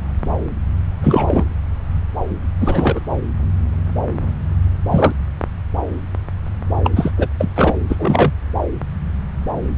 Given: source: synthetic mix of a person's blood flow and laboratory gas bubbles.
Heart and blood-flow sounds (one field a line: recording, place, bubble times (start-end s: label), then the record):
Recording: Doppler ultrasound of blood flow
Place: subclavian vein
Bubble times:
1.03-1.46 s: bubbles
2.60-2.99 s: bubbles
4.91-5.12 s: bubbles
6.83-6.91 s: bubbles
6.96-7.11 s: bubbles
7.17-7.28 s: bubbles
7.40-7.49 s: bubbles
7.55-7.76 s: bubbles
7.89-8.32 s: bubbles
From the record:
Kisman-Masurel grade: 223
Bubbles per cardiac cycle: several, 3 to 8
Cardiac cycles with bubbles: 10 to 50%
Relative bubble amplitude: loud (0.450 to 0.775)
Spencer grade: 2 (many but less than half of the cardiac periods contain bubble signals, singularly or in groups)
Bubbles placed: anywhere in the cardiac cycle